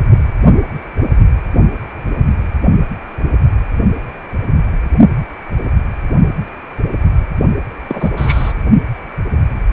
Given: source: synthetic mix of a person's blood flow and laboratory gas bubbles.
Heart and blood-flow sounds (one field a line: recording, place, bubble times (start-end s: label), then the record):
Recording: Doppler ultrasound of blood flow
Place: precordium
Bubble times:
7.87-8.10 s: bubbles
8.16-8.53 s: bubbles
From the record:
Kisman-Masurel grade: 212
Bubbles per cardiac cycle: several, 3 to 8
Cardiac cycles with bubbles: 1 to 10%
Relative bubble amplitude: moderate (0.250 to 0.450)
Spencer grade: 1 (occasional bubble signal discernible with the cardiac motion signal, with majority of cardiac periods free of bubbles)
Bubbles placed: only in the low amplitude regions of the cardiac cycle